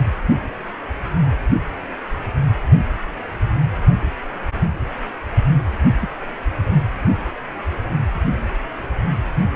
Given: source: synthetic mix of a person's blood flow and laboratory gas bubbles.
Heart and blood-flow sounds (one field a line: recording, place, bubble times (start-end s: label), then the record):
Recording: Doppler ultrasound of blood flow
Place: precordium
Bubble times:
6.01-6.08 s: bubbles
From the record:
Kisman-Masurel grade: 121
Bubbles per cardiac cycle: 1 to 2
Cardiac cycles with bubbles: 10 to 50%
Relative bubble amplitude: barely perceptible (0.100 to 0.250)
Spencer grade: 2 (many but less than half of the cardiac periods contain bubble signals, singularly or in groups)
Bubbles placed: only in the low amplitude regions of the cardiac cycle